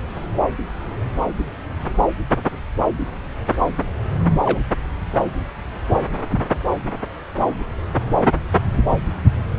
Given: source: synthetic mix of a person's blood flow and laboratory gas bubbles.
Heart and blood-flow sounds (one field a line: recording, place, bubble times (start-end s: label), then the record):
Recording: Doppler ultrasound of blood flow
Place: subclavian vein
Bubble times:
4.45-4.60 s: bubbles
From the record:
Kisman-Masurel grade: 113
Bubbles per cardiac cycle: 1 to 2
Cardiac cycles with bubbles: 1 to 10%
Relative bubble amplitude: loud (0.450 to 0.775)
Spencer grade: 1 (occasional bubble signal discernible with the cardiac motion signal, with majority of cardiac periods free of bubbles)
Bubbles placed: anywhere in the cardiac cycle